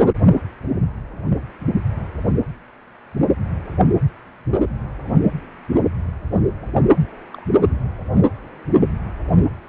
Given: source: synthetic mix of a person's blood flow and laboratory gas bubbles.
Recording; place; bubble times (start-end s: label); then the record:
Doppler ultrasound of blood flow; precordium
7.33-7.46 s: bubbles
From the record:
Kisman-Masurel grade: 111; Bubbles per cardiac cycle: 1 to 2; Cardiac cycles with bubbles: 1 to 10%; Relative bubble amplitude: barely perceptible (0.100 to 0.250); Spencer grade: 1 (occasional bubble signal discernible with the cardiac motion signal, with majority of cardiac periods free of bubbles); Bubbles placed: anywhere in the cardiac cycle